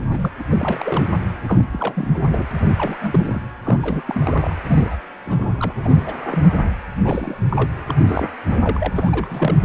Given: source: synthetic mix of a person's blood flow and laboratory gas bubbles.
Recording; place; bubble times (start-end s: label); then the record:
Doppler ultrasound of blood flow; precordium
0.00-0.31 s: bubbles
0.39-0.43 s: bubbles
0.50-1.09 s: bubbles
1.46-1.65 s: bubbles
1.72-2.08 s: bubbles
2.11-2.46 s: bubbles
2.51-2.66 s: bubbles
2.68-3.42 s: bubbles
3.65-4.01 s: bubbles
4.07-4.56 s: bubbles
4.67-4.97 s: bubbles
5.25-5.73 s: bubbles
5.84-6.17 s: bubbles
6.22-6.70 s: bubbles
7.00-7.37 s: bubbles
7.48-7.70 s: bubbles
7.88-7.94 s: bubbles
8.06-8.29 s: bubbles
8.49-8.59 s: bubbles
8.62-9.55 s: bubbles
From the record:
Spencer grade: 3 (all of the cardiac periods contain showers or single bubble signals, but not dominating or overriding the cardiac motion signals); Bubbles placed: anywhere in the cardiac cycle